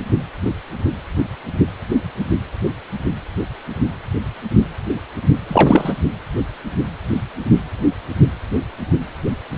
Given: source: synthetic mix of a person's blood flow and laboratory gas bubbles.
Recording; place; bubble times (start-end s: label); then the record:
Doppler ultrasound of blood flow; precordium
5.48-5.94 s: bubbles
From the record:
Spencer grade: 1 (occasional bubble signal discernible with the cardiac motion signal, with majority of cardiac periods free of bubbles); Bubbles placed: anywhere in the cardiac cycle